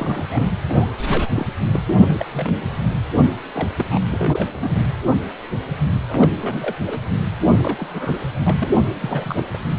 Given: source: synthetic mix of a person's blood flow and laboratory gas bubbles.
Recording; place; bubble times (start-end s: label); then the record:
Doppler ultrasound of blood flow; precordium
0.00-0.26 s: bubbles
0.30-0.52 s: bubbles
0.68-0.91 s: bubbles
1.07-1.27 s: bubbles
1.34-1.47 s: bubbles
1.73-1.81 s: bubbles
1.98-2.25 s: bubbles
2.31-2.69 s: bubbles
3.53-3.69 s: bubbles
3.78-3.99 s: bubbles
4.08-4.72 s: bubbles
6.09-6.28 s: bubbles
6.41-6.75 s: bubbles
6.86-7.00 s: bubbles
7.40-8.21 s: bubbles
8.46-8.55 s: bubbles
8.59-8.77 s: bubbles
9.01-9.44 s: bubbles
9.53-9.57 s: bubbles
From the record:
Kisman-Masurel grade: 232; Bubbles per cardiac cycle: several, 3 to 8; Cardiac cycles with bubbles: 50 to 99%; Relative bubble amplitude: moderate (0.250 to 0.450); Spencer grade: 3 (all of the cardiac periods contain showers or single bubble signals, but not dominating or overriding the cardiac motion signals); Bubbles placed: anywhere in the cardiac cycle